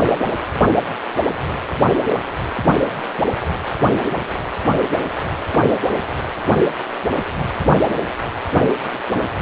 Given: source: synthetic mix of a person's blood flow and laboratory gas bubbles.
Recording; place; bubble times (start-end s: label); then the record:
Doppler ultrasound of blood flow; precordium
4.08-4.27 s: bubbles
9.16-9.29 s: bubbles
From the record:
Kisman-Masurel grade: 121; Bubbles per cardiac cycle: 1 to 2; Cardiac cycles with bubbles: 10 to 50%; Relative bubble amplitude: barely perceptible (0.100 to 0.250); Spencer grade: 2 (many but less than half of the cardiac periods contain bubble signals, singularly or in groups); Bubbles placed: anywhere in the cardiac cycle